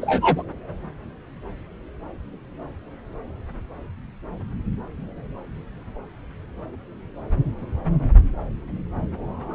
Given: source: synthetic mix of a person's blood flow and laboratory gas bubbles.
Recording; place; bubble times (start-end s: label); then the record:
Doppler ultrasound of blood flow; subclavian vein
0.02-0.43 s: bubbles
From the record:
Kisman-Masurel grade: 113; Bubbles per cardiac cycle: 1 to 2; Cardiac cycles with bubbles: 1 to 10%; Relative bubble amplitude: loud (0.450 to 0.775); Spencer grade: 1 (occasional bubble signal discernible with the cardiac motion signal, with majority of cardiac periods free of bubbles); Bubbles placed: anywhere in the cardiac cycle